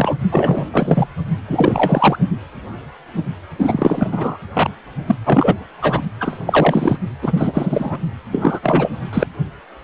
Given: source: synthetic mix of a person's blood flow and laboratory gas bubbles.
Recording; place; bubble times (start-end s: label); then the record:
Doppler ultrasound of blood flow; precordium
0.00-0.14 s: bubbles
0.30-0.68 s: bubbles
0.72-1.07 s: bubbles
1.48-2.19 s: bubbles
3.58-4.37 s: bubbles
4.53-4.70 s: bubbles
5.06-5.15 s: bubbles
5.25-5.55 s: bubbles
5.81-6.02 s: bubbles
6.20-6.40 s: bubbles
6.46-6.98 s: bubbles
7.22-7.99 s: bubbles
8.31-8.60 s: bubbles
8.62-8.92 s: bubbles
9.12-9.27 s: bubbles
From the record:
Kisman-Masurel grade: 333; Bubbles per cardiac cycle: rolling drumbeat, 9 or more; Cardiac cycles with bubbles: 50 to 99%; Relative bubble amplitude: loud (0.450 to 0.775); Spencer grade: 3 (all of the cardiac periods contain showers or single bubble signals, but not dominating or overriding the cardiac motion signals); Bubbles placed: only in the low amplitude regions of the cardiac cycle